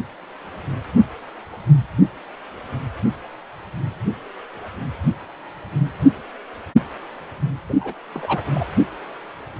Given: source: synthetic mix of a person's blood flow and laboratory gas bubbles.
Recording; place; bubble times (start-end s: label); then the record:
Doppler ultrasound of blood flow; precordium
7.69-7.74 s: bubbles
7.80-7.93 s: bubbles
8.13-8.44 s: bubbles
8.54-8.66 s: bubbles
From the record:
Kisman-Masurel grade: 212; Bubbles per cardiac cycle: several, 3 to 8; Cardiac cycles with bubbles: 1 to 10%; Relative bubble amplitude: moderate (0.250 to 0.450); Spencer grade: 1 (occasional bubble signal discernible with the cardiac motion signal, with majority of cardiac periods free of bubbles); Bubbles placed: anywhere in the cardiac cycle